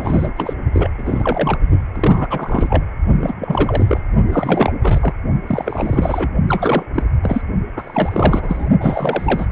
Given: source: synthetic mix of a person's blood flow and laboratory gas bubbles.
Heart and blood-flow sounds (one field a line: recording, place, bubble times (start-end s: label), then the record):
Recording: Doppler ultrasound of blood flow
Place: precordium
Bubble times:
0.00-0.29 s: bubbles
0.37-0.54 s: bubbles
0.72-0.91 s: bubbles
0.98-1.57 s: bubbles
1.96-2.27 s: bubbles
2.30-2.84 s: bubbles
3.21-3.33 s: bubbles
3.40-4.01 s: bubbles
4.29-4.72 s: bubbles
4.82-5.14 s: bubbles
5.47-6.33 s: bubbles
6.49-6.83 s: bubbles
6.95-7.03 s: bubbles
7.23-7.42 s: bubbles
7.76-8.69 s: bubbles
8.80-9.47 s: bubbles
From the record:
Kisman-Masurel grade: 332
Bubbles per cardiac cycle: rolling drumbeat, 9 or more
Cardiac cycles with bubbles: 50 to 99%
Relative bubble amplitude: moderate (0.250 to 0.450)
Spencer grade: 3 (all of the cardiac periods contain showers or single bubble signals, but not dominating or overriding the cardiac motion signals)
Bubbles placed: only in the low amplitude regions of the cardiac cycle